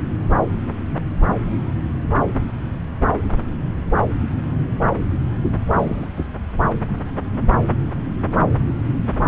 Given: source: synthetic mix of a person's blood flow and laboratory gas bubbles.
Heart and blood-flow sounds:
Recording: Doppler ultrasound of blood flow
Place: subclavian vein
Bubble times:
5.44-5.50 s: bubbles
5.73-6.08 s: bubbles
6.16-6.28 s: bubbles
6.62-6.71 s: bubbles
From the record:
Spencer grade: 1 (occasional bubble signal discernible with the cardiac motion signal, with majority of cardiac periods free of bubbles)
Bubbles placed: anywhere in the cardiac cycle

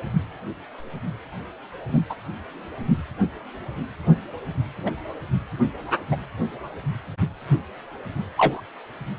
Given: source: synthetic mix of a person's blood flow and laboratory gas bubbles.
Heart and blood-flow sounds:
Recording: Doppler ultrasound of blood flow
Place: precordium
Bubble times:
1.88-2.00 s: bubbles
2.09-2.15 s: bubbles
4.86-4.91 s: bubbles
6.11-6.17 s: bubbles
7.48-7.59 s: bubbles
8.37-8.61 s: bubbles
From the record:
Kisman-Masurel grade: 122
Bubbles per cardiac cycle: 1 to 2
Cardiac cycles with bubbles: 10 to 50%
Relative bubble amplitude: moderate (0.250 to 0.450)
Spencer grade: 2 (many but less than half of the cardiac periods contain bubble signals, singularly or in groups)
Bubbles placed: anywhere in the cardiac cycle

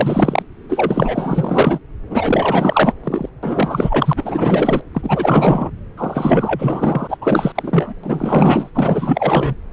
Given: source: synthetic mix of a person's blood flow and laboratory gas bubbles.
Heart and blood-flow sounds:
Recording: Doppler ultrasound of blood flow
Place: subclavian vein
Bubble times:
0.00-0.43 s: bubbles
0.69-1.79 s: bubbles
2.10-2.94 s: bubbles
3.04-3.29 s: bubbles
3.42-4.13 s: bubbles
4.16-4.81 s: bubbles
4.94-5.70 s: bubbles
5.97-7.17 s: bubbles
7.21-7.52 s: bubbles
7.54-7.94 s: bubbles
8.03-8.70 s: bubbles
8.74-9.54 s: bubbles
From the record:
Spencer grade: 4 (maximum detectable bubble signal sounding continuously throughout systole and diastole of every cardiac period, and overriding the amplitude of the normal cardiac signals)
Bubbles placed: anywhere in the cardiac cycle

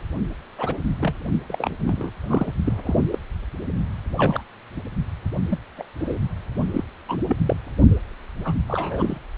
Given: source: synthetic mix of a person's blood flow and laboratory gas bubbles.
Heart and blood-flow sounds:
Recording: Doppler ultrasound of blood flow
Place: precordium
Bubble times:
0.57-0.79 s: bubbles
1.00-1.14 s: bubbles
1.48-1.75 s: bubbles
1.86-2.10 s: bubbles
2.23-2.52 s: bubbles
2.65-2.73 s: bubbles
2.85-2.96 s: bubbles
3.12-3.18 s: bubbles
4.17-4.41 s: bubbles
5.50-5.58 s: bubbles
5.77-5.86 s: bubbles
5.99-6.18 s: bubbles
6.74-6.84 s: bubbles
7.08-7.18 s: bubbles
7.28-7.36 s: bubbles
7.46-7.56 s: bubbles
8.44-8.56 s: bubbles
8.68-9.18 s: bubbles
From the record:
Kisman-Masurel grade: 242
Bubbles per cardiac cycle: several, 3 to 8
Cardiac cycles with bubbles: 100%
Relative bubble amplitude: moderate (0.250 to 0.450)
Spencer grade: 3 (all of the cardiac periods contain showers or single bubble signals, but not dominating or overriding the cardiac motion signals)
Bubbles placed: only in the low amplitude regions of the cardiac cycle

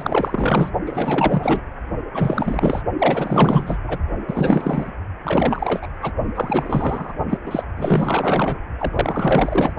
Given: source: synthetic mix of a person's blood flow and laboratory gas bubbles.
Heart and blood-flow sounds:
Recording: Doppler ultrasound of blood flow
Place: precordium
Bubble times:
0.00-0.71 s: bubbles
0.86-1.61 s: bubbles
2.12-2.81 s: bubbles
2.98-3.79 s: bubbles
3.83-3.99 s: bubbles
4.27-4.92 s: bubbles
5.24-5.79 s: bubbles
5.82-5.88 s: bubbles
6.01-6.12 s: bubbles
6.34-7.13 s: bubbles
7.29-7.38 s: bubbles
7.46-7.65 s: bubbles
7.76-8.58 s: bubbles
8.79-9.73 s: bubbles
From the record:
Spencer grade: 4 (maximum detectable bubble signal sounding continuously throughout systole and diastole of every cardiac period, and overriding the amplitude of the normal cardiac signals)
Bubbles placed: only in the low amplitude regions of the cardiac cycle

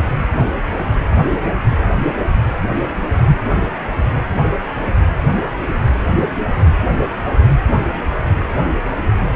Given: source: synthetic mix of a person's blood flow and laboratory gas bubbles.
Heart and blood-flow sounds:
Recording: Doppler ultrasound of blood flow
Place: precordium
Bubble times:
no bubbles
From the record:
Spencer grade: 0 (complete lack of bubble signals)

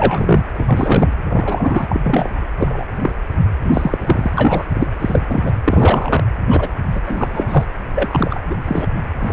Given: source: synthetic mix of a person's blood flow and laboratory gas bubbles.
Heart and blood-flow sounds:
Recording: Doppler ultrasound of blood flow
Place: precordium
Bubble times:
0.00-0.43 s: bubbles
0.54-1.11 s: bubbles
1.30-1.86 s: bubbles
1.89-2.00 s: bubbles
2.03-2.45 s: bubbles
2.58-2.84 s: bubbles
2.99-3.11 s: bubbles
3.65-4.30 s: bubbles
4.37-4.66 s: bubbles
4.73-4.88 s: bubbles
4.99-5.21 s: bubbles
5.27-5.51 s: bubbles
5.64-6.23 s: bubbles
6.50-6.68 s: bubbles
6.91-7.00 s: bubbles
7.06-7.66 s: bubbles
7.94-8.39 s: bubbles
8.50-8.56 s: bubbles
8.67-8.87 s: bubbles
9.19-9.33 s: bubbles
From the record:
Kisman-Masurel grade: 243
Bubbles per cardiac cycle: several, 3 to 8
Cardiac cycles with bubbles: 100%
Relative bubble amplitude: loud (0.450 to 0.775)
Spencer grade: 3 (all of the cardiac periods contain showers or single bubble signals, but not dominating or overriding the cardiac motion signals)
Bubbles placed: anywhere in the cardiac cycle

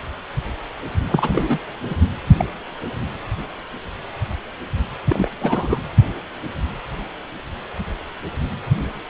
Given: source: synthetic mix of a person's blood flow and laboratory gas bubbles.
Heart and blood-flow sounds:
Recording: Doppler ultrasound of blood flow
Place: precordium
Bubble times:
1.07-1.59 s: bubbles
1.89-1.95 s: bubbles
2.38-2.45 s: bubbles
5.08-5.28 s: bubbles
5.40-5.82 s: bubbles
From the record:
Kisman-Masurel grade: 222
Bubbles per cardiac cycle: several, 3 to 8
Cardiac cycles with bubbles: 10 to 50%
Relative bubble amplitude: moderate (0.250 to 0.450)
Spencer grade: 2 (many but less than half of the cardiac periods contain bubble signals, singularly or in groups)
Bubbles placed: anywhere in the cardiac cycle

